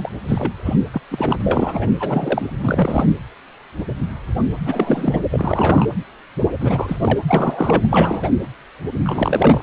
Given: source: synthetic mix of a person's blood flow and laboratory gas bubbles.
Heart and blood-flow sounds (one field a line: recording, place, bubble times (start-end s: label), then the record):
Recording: Doppler ultrasound of blood flow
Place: precordium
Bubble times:
0.00-0.09 s: bubbles
0.28-0.52 s: bubbles
0.65-0.76 s: bubbles
0.92-1.01 s: bubbles
1.11-1.35 s: bubbles
1.43-1.90 s: bubbles
1.99-2.54 s: bubbles
2.62-3.06 s: bubbles
4.61-5.22 s: bubbles
5.31-5.86 s: bubbles
6.60-6.97 s: bubbles
7.00-7.19 s: bubbles
7.28-8.31 s: bubbles
9.05-9.63 s: bubbles
From the record:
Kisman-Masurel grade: 333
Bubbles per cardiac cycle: rolling drumbeat, 9 or more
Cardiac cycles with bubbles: 50 to 99%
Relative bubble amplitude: loud (0.450 to 0.775)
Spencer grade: 3 (all of the cardiac periods contain showers or single bubble signals, but not dominating or overriding the cardiac motion signals)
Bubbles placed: anywhere in the cardiac cycle